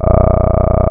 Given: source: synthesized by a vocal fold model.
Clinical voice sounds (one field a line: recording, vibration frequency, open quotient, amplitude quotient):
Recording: sustained vowel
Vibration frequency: 30 Hz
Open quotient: 0.3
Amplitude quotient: 1.2